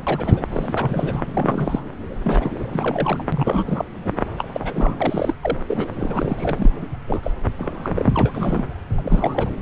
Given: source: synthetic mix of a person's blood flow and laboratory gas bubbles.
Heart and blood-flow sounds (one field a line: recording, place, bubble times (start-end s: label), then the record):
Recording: Doppler ultrasound of blood flow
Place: subclavian vein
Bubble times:
0.06-0.46 s: bubbles
0.52-1.24 s: bubbles
1.33-1.83 s: bubbles
2.24-2.52 s: bubbles
2.72-3.25 s: bubbles
3.32-3.85 s: bubbles
4.04-4.11 s: bubbles
4.38-4.44 s: bubbles
4.53-4.94 s: bubbles
4.98-5.34 s: bubbles
5.41-5.57 s: bubbles
5.66-5.88 s: bubbles
5.99-6.72 s: bubbles
7.07-7.32 s: bubbles
7.57-8.04 s: bubbles
8.14-8.65 s: bubbles
8.97-9.50 s: bubbles
From the record:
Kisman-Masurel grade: 332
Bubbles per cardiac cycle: rolling drumbeat, 9 or more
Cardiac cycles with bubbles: 50 to 99%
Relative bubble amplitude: moderate (0.250 to 0.450)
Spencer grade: 3 (all of the cardiac periods contain showers or single bubble signals, but not dominating or overriding the cardiac motion signals)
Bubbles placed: anywhere in the cardiac cycle